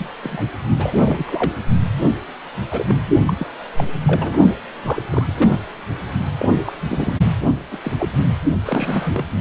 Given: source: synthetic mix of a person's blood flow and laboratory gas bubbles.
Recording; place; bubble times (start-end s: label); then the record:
Doppler ultrasound of blood flow; precordium
0.00-0.09 s: bubbles
0.23-0.44 s: bubbles
0.78-1.52 s: bubbles
2.71-2.96 s: bubbles
3.26-3.33 s: bubbles
3.39-3.47 s: bubbles
3.78-3.84 s: bubbles
4.06-4.38 s: bubbles
4.83-5.02 s: bubbles
5.10-5.58 s: bubbles
6.38-6.48 s: bubbles
6.65-6.72 s: bubbles
6.88-7.14 s: bubbles
7.71-7.77 s: bubbles
7.83-7.92 s: bubbles
7.98-8.08 s: bubbles
8.65-9.25 s: bubbles
From the record:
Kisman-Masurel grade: 242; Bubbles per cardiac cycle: several, 3 to 8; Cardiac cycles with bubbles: 100%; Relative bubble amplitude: moderate (0.250 to 0.450); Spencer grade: 3 (all of the cardiac periods contain showers or single bubble signals, but not dominating or overriding the cardiac motion signals); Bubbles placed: only in the low amplitude regions of the cardiac cycle